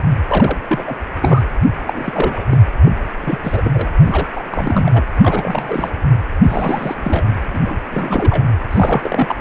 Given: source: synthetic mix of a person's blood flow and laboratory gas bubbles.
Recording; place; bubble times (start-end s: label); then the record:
Doppler ultrasound of blood flow; precordium
0.28-0.59 s: bubbles
0.68-0.83 s: bubbles
0.86-0.96 s: bubbles
1.22-1.43 s: bubbles
1.74-2.58 s: bubbles
2.85-2.92 s: bubbles
3.21-3.38 s: bubbles
3.43-3.87 s: bubbles
4.01-4.28 s: bubbles
4.33-4.43 s: bubbles
4.50-5.03 s: bubbles
5.21-5.90 s: bubbles
6.48-7.44 s: bubbles
7.53-7.60 s: bubbles
7.65-7.75 s: bubbles
7.90-8.43 s: bubbles
8.70-9.34 s: bubbles
From the record:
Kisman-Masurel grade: 332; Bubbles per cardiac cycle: rolling drumbeat, 9 or more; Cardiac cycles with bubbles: 50 to 99%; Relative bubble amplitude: moderate (0.250 to 0.450); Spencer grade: 3 (all of the cardiac periods contain showers or single bubble signals, but not dominating or overriding the cardiac motion signals); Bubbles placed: anywhere in the cardiac cycle